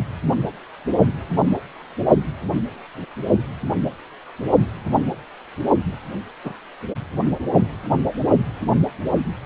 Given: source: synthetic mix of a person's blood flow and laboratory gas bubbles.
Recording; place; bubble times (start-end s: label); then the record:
Doppler ultrasound of blood flow; precordium
6.44-6.52 s: bubbles
From the record:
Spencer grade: 1 (occasional bubble signal discernible with the cardiac motion signal, with majority of cardiac periods free of bubbles); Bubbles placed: only in the low amplitude regions of the cardiac cycle